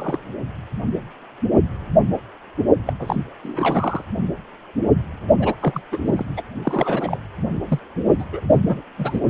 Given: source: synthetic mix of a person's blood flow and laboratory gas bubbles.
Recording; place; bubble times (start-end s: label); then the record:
Doppler ultrasound of blood flow; precordium
0.00-0.19 s: bubbles
2.86-2.93 s: bubbles
2.99-3.22 s: bubbles
3.43-4.05 s: bubbles
5.40-5.55 s: bubbles
5.61-5.82 s: bubbles
5.92-5.98 s: bubbles
6.07-6.25 s: bubbles
6.37-6.42 s: bubbles
6.64-7.19 s: bubbles
7.68-7.80 s: bubbles
8.18-8.24 s: bubbles
8.31-8.40 s: bubbles
8.48-8.58 s: bubbles
8.63-8.81 s: bubbles
8.98-9.20 s: bubbles
From the record:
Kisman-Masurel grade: 232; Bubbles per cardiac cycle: several, 3 to 8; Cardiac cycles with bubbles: 50 to 99%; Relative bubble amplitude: moderate (0.250 to 0.450); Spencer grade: 3 (all of the cardiac periods contain showers or single bubble signals, but not dominating or overriding the cardiac motion signals); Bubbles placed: only in the low amplitude regions of the cardiac cycle